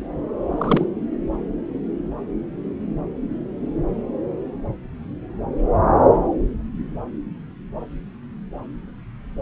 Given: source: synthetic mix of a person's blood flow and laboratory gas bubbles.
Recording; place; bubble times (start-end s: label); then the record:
Doppler ultrasound of blood flow; subclavian vein
0.58-0.86 s: bubbles
From the record:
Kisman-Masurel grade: 212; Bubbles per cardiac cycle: several, 3 to 8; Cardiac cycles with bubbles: 1 to 10%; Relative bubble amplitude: moderate (0.250 to 0.450); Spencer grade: 1 (occasional bubble signal discernible with the cardiac motion signal, with majority of cardiac periods free of bubbles); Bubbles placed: anywhere in the cardiac cycle